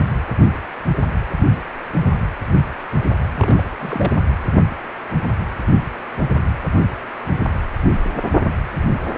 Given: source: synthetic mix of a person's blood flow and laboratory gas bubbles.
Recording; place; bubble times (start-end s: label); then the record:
Doppler ultrasound of blood flow; precordium
3.35-3.64 s: bubbles
3.78-4.13 s: bubbles
From the record:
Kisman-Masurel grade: 221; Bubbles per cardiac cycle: several, 3 to 8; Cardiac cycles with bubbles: 10 to 50%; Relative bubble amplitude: barely perceptible (0.100 to 0.250); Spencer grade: 2 (many but less than half of the cardiac periods contain bubble signals, singularly or in groups); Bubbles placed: anywhere in the cardiac cycle